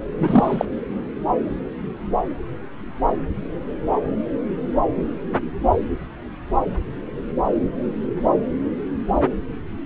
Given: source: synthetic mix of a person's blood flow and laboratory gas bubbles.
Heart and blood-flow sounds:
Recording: Doppler ultrasound of blood flow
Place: subclavian vein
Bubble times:
0.18-0.65 s: bubbles
From the record:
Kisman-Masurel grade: 213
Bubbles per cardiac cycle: several, 3 to 8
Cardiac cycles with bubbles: 1 to 10%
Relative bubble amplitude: loud (0.450 to 0.775)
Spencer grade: 1 (occasional bubble signal discernible with the cardiac motion signal, with majority of cardiac periods free of bubbles)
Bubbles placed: anywhere in the cardiac cycle

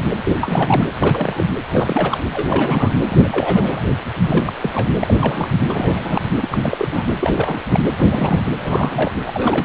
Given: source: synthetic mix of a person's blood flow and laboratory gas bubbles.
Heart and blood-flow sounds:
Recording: Doppler ultrasound of blood flow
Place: precordium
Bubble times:
0.00-0.02 s: bubbles
0.25-0.32 s: bubbles
0.39-0.84 s: bubbles
1.00-1.45 s: bubbles
1.70-2.20 s: bubbles
2.33-2.97 s: bubbles
3.10-3.82 s: bubbles
4.14-4.53 s: bubbles
4.60-4.89 s: bubbles
5.00-5.14 s: bubbles
5.17-5.50 s: bubbles
5.69-6.21 s: bubbles
6.41-7.04 s: bubbles
7.19-7.57 s: bubbles
7.70-7.80 s: bubbles
7.97-8.42 s: bubbles
8.57-9.12 s: bubbles
9.27-9.64 s: bubbles
From the record:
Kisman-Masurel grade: 342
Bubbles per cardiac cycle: rolling drumbeat, 9 or more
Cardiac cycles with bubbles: 100%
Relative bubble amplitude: moderate (0.250 to 0.450)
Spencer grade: 3 (all of the cardiac periods contain showers or single bubble signals, but not dominating or overriding the cardiac motion signals)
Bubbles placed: anywhere in the cardiac cycle

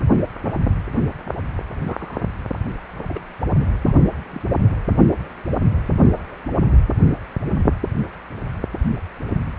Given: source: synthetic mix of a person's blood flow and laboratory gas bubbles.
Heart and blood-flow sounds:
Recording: Doppler ultrasound of blood flow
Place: precordium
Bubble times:
1.85-2.21 s: bubbles
3.08-3.20 s: bubbles
3.86-3.92 s: bubbles
4.32-4.41 s: bubbles
From the record:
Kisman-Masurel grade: 121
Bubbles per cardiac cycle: 1 to 2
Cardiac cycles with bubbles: 10 to 50%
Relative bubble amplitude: barely perceptible (0.100 to 0.250)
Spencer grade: 2 (many but less than half of the cardiac periods contain bubble signals, singularly or in groups)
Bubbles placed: anywhere in the cardiac cycle

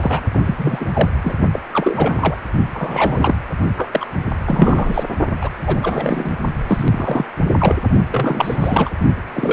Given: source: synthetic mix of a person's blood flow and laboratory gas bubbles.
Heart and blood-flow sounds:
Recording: Doppler ultrasound of blood flow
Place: precordium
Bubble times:
0.00-0.21 s: bubbles
0.32-0.40 s: bubbles
0.46-0.86 s: bubbles
0.93-1.09 s: bubbles
1.24-1.34 s: bubbles
1.53-1.59 s: bubbles
1.72-2.36 s: bubbles
2.73-3.35 s: bubbles
3.77-4.06 s: bubbles
4.45-5.04 s: bubbles
5.41-5.49 s: bubbles
5.63-6.33 s: bubbles
6.68-7.25 s: bubbles
7.58-7.75 s: bubbles
8.11-8.89 s: bubbles
9.34-9.53 s: bubbles
From the record:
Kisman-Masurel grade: 333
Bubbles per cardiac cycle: rolling drumbeat, 9 or more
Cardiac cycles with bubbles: 50 to 99%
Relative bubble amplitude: loud (0.450 to 0.775)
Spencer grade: 3 (all of the cardiac periods contain showers or single bubble signals, but not dominating or overriding the cardiac motion signals)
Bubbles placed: only in the low amplitude regions of the cardiac cycle

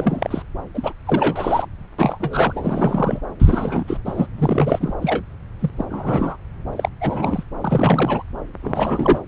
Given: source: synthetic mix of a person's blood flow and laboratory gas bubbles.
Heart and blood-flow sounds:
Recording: Doppler ultrasound of blood flow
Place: subclavian vein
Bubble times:
0.00-0.42 s: bubbles
0.74-0.93 s: bubbles
1.05-1.66 s: bubbles
1.98-3.23 s: bubbles
3.40-4.00 s: bubbles
4.05-4.27 s: bubbles
4.38-4.94 s: bubbles
5.02-5.23 s: bubbles
5.59-5.71 s: bubbles
5.77-5.85 s: bubbles
5.90-6.37 s: bubbles
6.73-6.89 s: bubbles
7.00-7.44 s: bubbles
7.61-8.22 s: bubbles
8.62-9.18 s: bubbles
From the record:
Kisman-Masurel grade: 332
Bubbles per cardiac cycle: rolling drumbeat, 9 or more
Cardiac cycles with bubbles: 50 to 99%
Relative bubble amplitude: moderate (0.250 to 0.450)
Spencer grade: 3 (all of the cardiac periods contain showers or single bubble signals, but not dominating or overriding the cardiac motion signals)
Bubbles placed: anywhere in the cardiac cycle

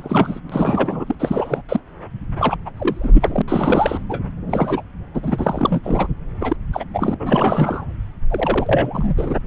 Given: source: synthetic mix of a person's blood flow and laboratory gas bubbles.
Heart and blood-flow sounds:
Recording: Doppler ultrasound of blood flow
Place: subclavian vein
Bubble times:
0.00-0.40 s: bubbles
0.49-1.15 s: bubbles
1.19-1.62 s: bubbles
1.69-1.80 s: bubbles
2.39-2.57 s: bubbles
2.65-2.71 s: bubbles
2.76-3.42 s: bubbles
3.48-4.04 s: bubbles
4.09-4.20 s: bubbles
4.46-4.83 s: bubbles
5.13-5.80 s: bubbles
5.83-6.07 s: bubbles
6.40-6.56 s: bubbles
6.72-6.84 s: bubbles
6.94-7.15 s: bubbles
7.20-7.85 s: bubbles
8.29-9.35 s: bubbles
From the record:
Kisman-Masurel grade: 342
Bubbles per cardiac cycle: rolling drumbeat, 9 or more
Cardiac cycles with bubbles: 100%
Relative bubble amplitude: moderate (0.250 to 0.450)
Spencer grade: 3 (all of the cardiac periods contain showers or single bubble signals, but not dominating or overriding the cardiac motion signals)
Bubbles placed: anywhere in the cardiac cycle

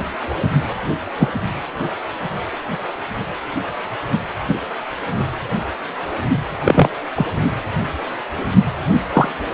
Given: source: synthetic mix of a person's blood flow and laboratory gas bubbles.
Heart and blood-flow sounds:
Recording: Doppler ultrasound of blood flow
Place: precordium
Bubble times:
1.20-1.28 s: bubbles
4.47-4.58 s: bubbles
6.64-6.89 s: bubbles
7.15-7.27 s: bubbles
9.12-9.28 s: bubbles
From the record:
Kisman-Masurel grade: 123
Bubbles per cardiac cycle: 1 to 2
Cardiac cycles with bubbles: 10 to 50%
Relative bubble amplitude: loud (0.450 to 0.775)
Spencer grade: 2 (many but less than half of the cardiac periods contain bubble signals, singularly or in groups)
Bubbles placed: anywhere in the cardiac cycle

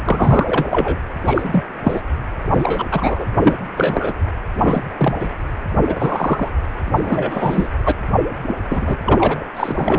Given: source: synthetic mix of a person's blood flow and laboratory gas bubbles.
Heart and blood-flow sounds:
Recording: Doppler ultrasound of blood flow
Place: precordium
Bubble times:
0.04-0.65 s: bubbles
0.71-0.97 s: bubbles
1.25-1.63 s: bubbles
1.83-2.02 s: bubbles
2.52-2.87 s: bubbles
2.90-3.25 s: bubbles
3.37-3.58 s: bubbles
3.77-4.13 s: bubbles
4.57-4.86 s: bubbles
4.98-5.17 s: bubbles
5.20-5.28 s: bubbles
5.86-6.48 s: bubbles
6.85-7.68 s: bubbles
7.84-7.92 s: bubbles
8.47-8.55 s: bubbles
8.69-8.96 s: bubbles
9.04-9.45 s: bubbles
9.56-9.99 s: bubbles
From the record:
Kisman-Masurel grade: 243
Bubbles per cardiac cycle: several, 3 to 8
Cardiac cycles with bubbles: 100%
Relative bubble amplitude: loud (0.450 to 0.775)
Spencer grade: 3 (all of the cardiac periods contain showers or single bubble signals, but not dominating or overriding the cardiac motion signals)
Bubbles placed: anywhere in the cardiac cycle

